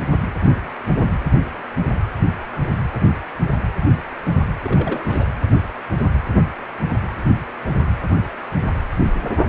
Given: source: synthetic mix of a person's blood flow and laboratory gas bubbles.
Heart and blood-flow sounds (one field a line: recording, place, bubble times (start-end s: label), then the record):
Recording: Doppler ultrasound of blood flow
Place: precordium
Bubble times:
4.62-5.27 s: bubbles
From the record:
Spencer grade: 1 (occasional bubble signal discernible with the cardiac motion signal, with majority of cardiac periods free of bubbles)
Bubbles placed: anywhere in the cardiac cycle